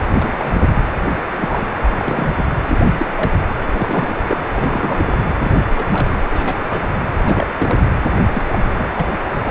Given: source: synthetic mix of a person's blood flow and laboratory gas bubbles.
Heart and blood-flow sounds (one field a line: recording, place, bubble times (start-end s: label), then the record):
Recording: Doppler ultrasound of blood flow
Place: precordium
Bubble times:
0.14-0.72 s: bubbles
1.05-1.17 s: bubbles
1.39-1.67 s: bubbles
1.82-1.91 s: bubbles
1.99-2.34 s: bubbles
2.37-2.45 s: bubbles
2.66-2.78 s: bubbles
2.98-3.06 s: bubbles
3.17-3.30 s: bubbles
3.72-4.17 s: bubbles
4.27-4.41 s: bubbles
4.55-5.16 s: bubbles
5.41-5.62 s: bubbles
5.75-5.84 s: bubbles
5.92-6.26 s: bubbles
6.30-6.81 s: bubbles
7.25-7.46 s: bubbles
7.60-7.89 s: bubbles
8.33-8.44 s: bubbles
8.52-8.59 s: bubbles
8.77-8.93 s: bubbles
8.96-9.08 s: bubbles
9.43-9.51 s: bubbles
From the record:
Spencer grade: 3 (all of the cardiac periods contain showers or single bubble signals, but not dominating or overriding the cardiac motion signals)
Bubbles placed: anywhere in the cardiac cycle